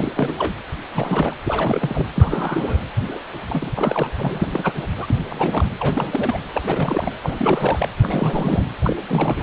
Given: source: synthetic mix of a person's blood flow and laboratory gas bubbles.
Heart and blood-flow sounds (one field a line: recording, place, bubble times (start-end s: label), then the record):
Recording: Doppler ultrasound of blood flow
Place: precordium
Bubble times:
0.00-0.12 s: bubbles
0.15-0.53 s: bubbles
0.92-1.36 s: bubbles
1.43-2.06 s: bubbles
2.15-2.78 s: bubbles
3.07-3.20 s: bubbles
3.49-3.71 s: bubbles
3.75-4.12 s: bubbles
4.17-4.48 s: bubbles
4.50-4.73 s: bubbles
4.75-4.87 s: bubbles
4.98-5.06 s: bubbles
5.10-5.16 s: bubbles
5.29-5.68 s: bubbles
5.79-6.39 s: bubbles
6.54-7.14 s: bubbles
7.21-7.89 s: bubbles
8.02-8.64 s: bubbles
8.84-8.96 s: bubbles
9.08-9.43 s: bubbles
From the record:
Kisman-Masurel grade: 342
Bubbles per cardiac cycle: rolling drumbeat, 9 or more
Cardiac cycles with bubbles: 100%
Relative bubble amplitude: moderate (0.250 to 0.450)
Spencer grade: 3 (all of the cardiac periods contain showers or single bubble signals, but not dominating or overriding the cardiac motion signals)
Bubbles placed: anywhere in the cardiac cycle